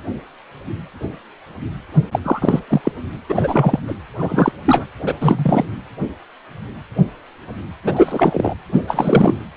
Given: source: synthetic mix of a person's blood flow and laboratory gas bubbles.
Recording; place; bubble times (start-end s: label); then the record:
Doppler ultrasound of blood flow; precordium
2.11-2.19 s: bubbles
2.23-2.62 s: bubbles
2.70-2.81 s: bubbles
2.83-2.92 s: bubbles
3.28-3.79 s: bubbles
3.87-3.95 s: bubbles
4.18-4.52 s: bubbles
4.64-4.84 s: bubbles
5.05-5.13 s: bubbles
5.20-5.65 s: bubbles
7.84-8.54 s: bubbles
8.72-8.83 s: bubbles
8.87-9.38 s: bubbles
From the record:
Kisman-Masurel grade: 333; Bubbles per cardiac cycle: rolling drumbeat, 9 or more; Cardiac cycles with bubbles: 50 to 99%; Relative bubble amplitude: loud (0.450 to 0.775); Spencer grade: 3 (all of the cardiac periods contain showers or single bubble signals, but not dominating or overriding the cardiac motion signals); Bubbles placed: anywhere in the cardiac cycle